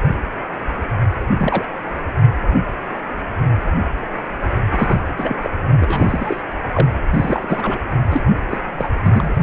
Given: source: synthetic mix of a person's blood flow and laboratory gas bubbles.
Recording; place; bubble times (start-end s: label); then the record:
Doppler ultrasound of blood flow; precordium
1.38-1.65 s: bubbles
4.68-4.98 s: bubbles
5.01-5.38 s: bubbles
5.44-5.50 s: bubbles
5.79-6.42 s: bubbles
6.72-6.88 s: bubbles
7.13-7.78 s: bubbles
8.10-8.21 s: bubbles
8.50-8.58 s: bubbles
8.78-8.90 s: bubbles
9.03-9.36 s: bubbles
From the record:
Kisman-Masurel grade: 222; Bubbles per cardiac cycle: several, 3 to 8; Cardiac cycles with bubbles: 10 to 50%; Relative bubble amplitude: moderate (0.250 to 0.450); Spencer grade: 2 (many but less than half of the cardiac periods contain bubble signals, singularly or in groups); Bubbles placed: anywhere in the cardiac cycle